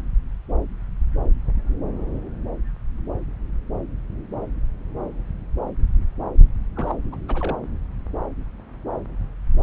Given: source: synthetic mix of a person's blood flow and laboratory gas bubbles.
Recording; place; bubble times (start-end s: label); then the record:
Doppler ultrasound of blood flow; subclavian vein
6.75-6.94 s: bubbles
7.12-7.17 s: bubbles
7.28-7.59 s: bubbles
From the record:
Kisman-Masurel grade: 211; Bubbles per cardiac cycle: several, 3 to 8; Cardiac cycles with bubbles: 1 to 10%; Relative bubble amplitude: barely perceptible (0.100 to 0.250); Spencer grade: 1 (occasional bubble signal discernible with the cardiac motion signal, with majority of cardiac periods free of bubbles); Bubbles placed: anywhere in the cardiac cycle